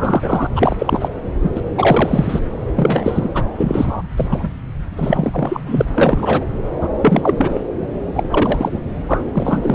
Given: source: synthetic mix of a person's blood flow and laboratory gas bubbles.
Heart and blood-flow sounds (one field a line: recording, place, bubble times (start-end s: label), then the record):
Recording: Doppler ultrasound of blood flow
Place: subclavian vein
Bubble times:
0.00-0.47 s: bubbles
0.56-0.76 s: bubbles
0.79-1.08 s: bubbles
1.42-1.51 s: bubbles
1.55-1.61 s: bubbles
1.76-2.40 s: bubbles
2.75-3.29 s: bubbles
3.34-3.44 s: bubbles
3.57-4.02 s: bubbles
4.17-4.49 s: bubbles
4.97-5.60 s: bubbles
5.66-5.85 s: bubbles
5.94-6.46 s: bubbles
6.80-6.89 s: bubbles
7.01-7.61 s: bubbles
8.15-8.24 s: bubbles
8.29-8.79 s: bubbles
9.08-9.23 s: bubbles
9.33-9.75 s: bubbles
From the record:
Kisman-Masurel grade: 343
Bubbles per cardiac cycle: rolling drumbeat, 9 or more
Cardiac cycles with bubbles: 100%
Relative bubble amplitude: loud (0.450 to 0.775)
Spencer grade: 3 (all of the cardiac periods contain showers or single bubble signals, but not dominating or overriding the cardiac motion signals)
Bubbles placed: anywhere in the cardiac cycle